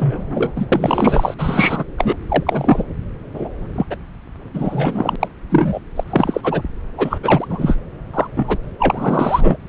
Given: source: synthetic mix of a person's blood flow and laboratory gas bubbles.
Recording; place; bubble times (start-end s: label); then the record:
Doppler ultrasound of blood flow; subclavian vein
0.00-0.53 s: bubbles
0.55-0.67 s: bubbles
0.71-1.34 s: bubbles
1.38-1.85 s: bubbles
1.98-2.16 s: bubbles
2.28-2.84 s: bubbles
3.33-3.48 s: bubbles
3.75-3.85 s: bubbles
3.90-3.95 s: bubbles
4.54-5.16 s: bubbles
5.20-5.28 s: bubbles
5.50-5.79 s: bubbles
5.96-6.04 s: bubbles
6.10-6.62 s: bubbles
6.97-7.18 s: bubbles
7.23-7.76 s: bubbles
8.13-8.27 s: bubbles
8.36-8.57 s: bubbles
8.79-9.56 s: bubbles
From the record:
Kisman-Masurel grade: 243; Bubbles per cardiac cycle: several, 3 to 8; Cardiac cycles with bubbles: 100%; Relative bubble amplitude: loud (0.450 to 0.775); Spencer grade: 3 (all of the cardiac periods contain showers or single bubble signals, but not dominating or overriding the cardiac motion signals); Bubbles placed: anywhere in the cardiac cycle